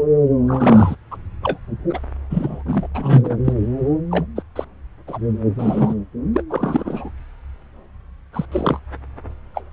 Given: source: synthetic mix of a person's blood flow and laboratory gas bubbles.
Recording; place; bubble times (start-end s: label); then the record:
Doppler ultrasound of blood flow; subclavian vein
0.48-0.96 s: bubbles
1.11-1.17 s: bubbles
1.43-1.58 s: bubbles
1.89-2.00 s: bubbles
2.29-2.88 s: bubbles
2.94-3.38 s: bubbles
3.44-3.53 s: bubbles
4.11-4.26 s: bubbles
4.36-4.43 s: bubbles
4.56-4.65 s: bubbles
5.07-5.18 s: bubbles
5.59-5.95 s: bubbles
6.33-6.42 s: bubbles
6.50-7.10 s: bubbles
8.33-8.46 s: bubbles
8.52-8.79 s: bubbles
9.54-9.63 s: bubbles
From the record:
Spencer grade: 3 (all of the cardiac periods contain showers or single bubble signals, but not dominating or overriding the cardiac motion signals); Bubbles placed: anywhere in the cardiac cycle